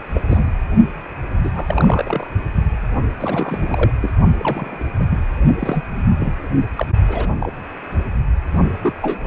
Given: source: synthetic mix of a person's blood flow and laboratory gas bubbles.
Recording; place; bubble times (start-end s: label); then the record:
Doppler ultrasound of blood flow; precordium
0.12-0.48 s: bubbles
1.36-2.30 s: bubbles
3.19-3.92 s: bubbles
4.01-4.13 s: bubbles
4.38-4.87 s: bubbles
4.99-5.04 s: bubbles
5.09-5.19 s: bubbles
5.59-5.83 s: bubbles
6.20-6.33 s: bubbles
6.75-6.87 s: bubbles
7.08-7.28 s: bubbles
7.39-7.53 s: bubbles
8.83-8.94 s: bubbles
9.02-9.19 s: bubbles
9.23-9.27 s: bubbles
From the record:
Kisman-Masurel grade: 242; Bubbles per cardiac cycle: several, 3 to 8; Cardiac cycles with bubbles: 100%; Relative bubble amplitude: moderate (0.250 to 0.450); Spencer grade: 3 (all of the cardiac periods contain showers or single bubble signals, but not dominating or overriding the cardiac motion signals); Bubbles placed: only in the low amplitude regions of the cardiac cycle